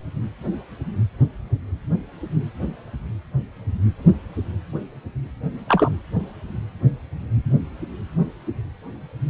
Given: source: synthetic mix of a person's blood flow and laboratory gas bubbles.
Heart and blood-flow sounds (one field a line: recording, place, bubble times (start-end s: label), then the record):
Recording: Doppler ultrasound of blood flow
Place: precordium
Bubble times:
5.67-5.92 s: bubbles
From the record:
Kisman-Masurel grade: 112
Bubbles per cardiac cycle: 1 to 2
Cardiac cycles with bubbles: 1 to 10%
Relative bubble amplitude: moderate (0.250 to 0.450)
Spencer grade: 1 (occasional bubble signal discernible with the cardiac motion signal, with majority of cardiac periods free of bubbles)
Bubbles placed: anywhere in the cardiac cycle